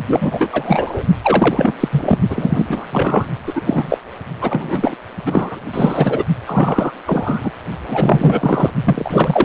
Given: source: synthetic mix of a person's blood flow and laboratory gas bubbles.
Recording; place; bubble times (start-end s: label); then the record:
Doppler ultrasound of blood flow; precordium
0.07-0.48 s: bubbles
0.52-1.03 s: bubbles
1.23-1.72 s: bubbles
1.80-2.18 s: bubbles
2.29-2.88 s: bubbles
2.92-3.29 s: bubbles
3.46-3.62 s: bubbles
3.66-3.98 s: bubbles
4.41-4.95 s: bubbles
5.25-5.59 s: bubbles
5.72-6.24 s: bubbles
6.46-6.92 s: bubbles
7.06-7.51 s: bubbles
7.88-8.71 s: bubbles
8.84-9.45 s: bubbles
From the record:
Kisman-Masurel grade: 343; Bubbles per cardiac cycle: rolling drumbeat, 9 or more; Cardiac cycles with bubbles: 100%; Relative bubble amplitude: loud (0.450 to 0.775); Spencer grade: 3 (all of the cardiac periods contain showers or single bubble signals, but not dominating or overriding the cardiac motion signals); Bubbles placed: only in the low amplitude regions of the cardiac cycle